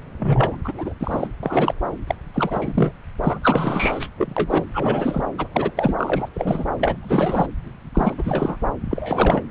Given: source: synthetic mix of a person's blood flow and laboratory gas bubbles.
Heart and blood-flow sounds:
Doppler ultrasound of blood flow; subclavian vein
0.19-0.56 s: bubbles
0.64-0.93 s: bubbles
1.00-1.28 s: bubbles
1.43-1.74 s: bubbles
2.07-2.15 s: bubbles
2.34-2.92 s: bubbles
3.23-3.39 s: bubbles
3.42-4.09 s: bubbles
4.17-4.34 s: bubbles
4.37-4.65 s: bubbles
4.74-5.21 s: bubbles
5.38-5.48 s: bubbles
5.52-5.71 s: bubbles
5.76-5.94 s: bubbles
5.98-6.29 s: bubbles
6.34-6.65 s: bubbles
6.79-6.96 s: bubbles
7.02-7.46 s: bubbles
7.94-8.14 s: bubbles
8.18-8.57 s: bubbles
8.90-9.43 s: bubbles
From the record:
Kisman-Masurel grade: 342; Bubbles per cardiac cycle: rolling drumbeat, 9 or more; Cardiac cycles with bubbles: 100%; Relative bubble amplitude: moderate (0.250 to 0.450); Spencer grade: 3 (all of the cardiac periods contain showers or single bubble signals, but not dominating or overriding the cardiac motion signals); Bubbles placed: anywhere in the cardiac cycle

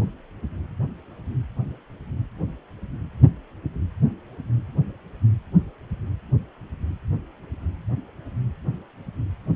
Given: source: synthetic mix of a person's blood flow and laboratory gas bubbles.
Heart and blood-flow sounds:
Doppler ultrasound of blood flow; precordium
no bubbles
From the record:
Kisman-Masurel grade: 000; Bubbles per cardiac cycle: 0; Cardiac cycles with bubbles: 0%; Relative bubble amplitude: no bubbles discernible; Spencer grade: 0 (complete lack of bubble signals)

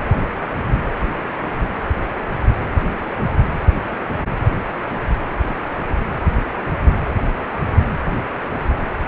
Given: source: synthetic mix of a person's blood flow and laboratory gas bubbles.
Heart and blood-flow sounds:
Doppler ultrasound of blood flow; precordium
no bubbles
From the record:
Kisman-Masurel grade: 000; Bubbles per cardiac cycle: 0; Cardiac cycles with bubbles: 0%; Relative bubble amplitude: no bubbles discernible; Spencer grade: 0 (complete lack of bubble signals)

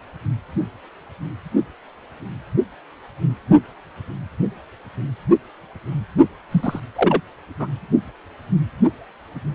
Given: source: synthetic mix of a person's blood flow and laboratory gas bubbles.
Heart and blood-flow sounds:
Doppler ultrasound of blood flow; precordium
6.51-6.80 s: bubbles
6.96-7.21 s: bubbles
7.59-7.67 s: bubbles
From the record:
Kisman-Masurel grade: 222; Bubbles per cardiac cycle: several, 3 to 8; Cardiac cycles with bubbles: 10 to 50%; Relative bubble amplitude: moderate (0.250 to 0.450); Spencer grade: 2 (many but less than half of the cardiac periods contain bubble signals, singularly or in groups); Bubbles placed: only in the low amplitude regions of the cardiac cycle

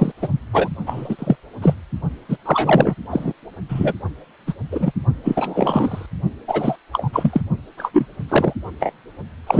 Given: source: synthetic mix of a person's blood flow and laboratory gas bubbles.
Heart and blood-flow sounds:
Doppler ultrasound of blood flow; precordium
0.00-0.12 s: bubbles
0.21-0.28 s: bubbles
0.53-0.69 s: bubbles
0.86-1.16 s: bubbles
1.18-1.35 s: bubbles
1.62-1.74 s: bubbles
2.28-2.37 s: bubbles
2.46-2.94 s: bubbles
3.10-3.33 s: bubbles
3.69-3.94 s: bubbles
4.47-4.54 s: bubbles
4.71-4.92 s: bubbles
5.24-6.06 s: bubbles
6.48-6.76 s: bubbles
6.92-7.10 s: bubbles
7.12-7.41 s: bubbles
7.78-8.06 s: bubbles
8.28-8.54 s: bubbles
8.79-8.93 s: bubbles
9.46-9.60 s: bubbles
From the record:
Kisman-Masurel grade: 233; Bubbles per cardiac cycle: several, 3 to 8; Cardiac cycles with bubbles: 50 to 99%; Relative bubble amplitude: loud (0.450 to 0.775); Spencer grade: 3 (all of the cardiac periods contain showers or single bubble signals, but not dominating or overriding the cardiac motion signals); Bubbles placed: only in the low amplitude regions of the cardiac cycle

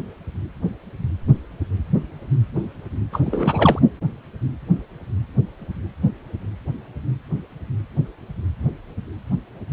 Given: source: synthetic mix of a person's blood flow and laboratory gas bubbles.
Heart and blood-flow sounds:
Doppler ultrasound of blood flow; precordium
3.12-3.21 s: bubbles
3.25-3.79 s: bubbles
From the record:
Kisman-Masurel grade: 212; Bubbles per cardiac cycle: several, 3 to 8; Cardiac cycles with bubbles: 1 to 10%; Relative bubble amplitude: moderate (0.250 to 0.450); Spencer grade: 1 (occasional bubble signal discernible with the cardiac motion signal, with majority of cardiac periods free of bubbles); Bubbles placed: anywhere in the cardiac cycle

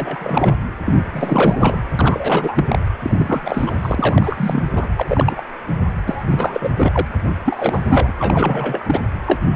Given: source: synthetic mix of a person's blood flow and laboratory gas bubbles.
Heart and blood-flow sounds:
Doppler ultrasound of blood flow; precordium
0.00-0.56 s: bubbles
0.85-0.93 s: bubbles
1.12-1.82 s: bubbles
1.99-2.79 s: bubbles
3.00-3.75 s: bubbles
3.82-4.64 s: bubbles
4.72-4.89 s: bubbles
4.96-5.04 s: bubbles
5.08-5.42 s: bubbles
6.07-6.24 s: bubbles
6.30-6.69 s: bubbles
6.77-7.07 s: bubbles
7.45-8.13 s: bubbles
8.20-9.00 s: bubbles
9.26-9.39 s: bubbles
9.54-9.56 s: bubbles
From the record:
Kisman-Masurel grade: 342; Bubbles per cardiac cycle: rolling drumbeat, 9 or more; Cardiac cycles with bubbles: 100%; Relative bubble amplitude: moderate (0.250 to 0.450); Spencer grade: 3 (all of the cardiac periods contain showers or single bubble signals, but not dominating or overriding the cardiac motion signals); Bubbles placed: anywhere in the cardiac cycle

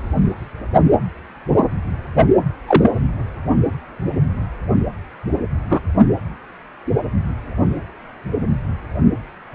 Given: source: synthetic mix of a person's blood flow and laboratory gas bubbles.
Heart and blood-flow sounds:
Doppler ultrasound of blood flow; precordium
2.67-2.92 s: bubbles
5.69-5.79 s: bubbles
From the record:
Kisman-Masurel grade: 123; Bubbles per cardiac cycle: 1 to 2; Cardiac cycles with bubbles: 10 to 50%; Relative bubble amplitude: loud (0.450 to 0.775); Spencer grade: 2 (many but less than half of the cardiac periods contain bubble signals, singularly or in groups); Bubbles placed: anywhere in the cardiac cycle

